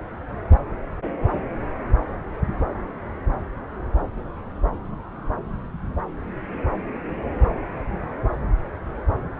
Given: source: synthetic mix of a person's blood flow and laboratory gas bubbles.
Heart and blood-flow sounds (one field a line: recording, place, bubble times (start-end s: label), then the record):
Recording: Doppler ultrasound of blood flow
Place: subclavian vein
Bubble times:
no bubbles
From the record:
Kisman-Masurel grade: 000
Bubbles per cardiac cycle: 0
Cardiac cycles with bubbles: 0%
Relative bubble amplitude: no bubbles discernible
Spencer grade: 0 (complete lack of bubble signals)